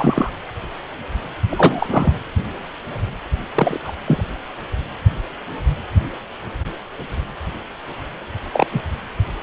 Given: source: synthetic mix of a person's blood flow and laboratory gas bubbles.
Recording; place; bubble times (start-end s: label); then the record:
Doppler ultrasound of blood flow; precordium
0.00-0.30 s: bubbles
1.49-2.12 s: bubbles
3.55-3.80 s: bubbles
3.85-3.92 s: bubbles
4.07-4.23 s: bubbles
8.54-8.66 s: bubbles
8.71-8.83 s: bubbles
From the record:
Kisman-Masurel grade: 222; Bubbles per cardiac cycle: several, 3 to 8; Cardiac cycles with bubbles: 10 to 50%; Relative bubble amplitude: moderate (0.250 to 0.450); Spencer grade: 2 (many but less than half of the cardiac periods contain bubble signals, singularly or in groups); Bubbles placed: anywhere in the cardiac cycle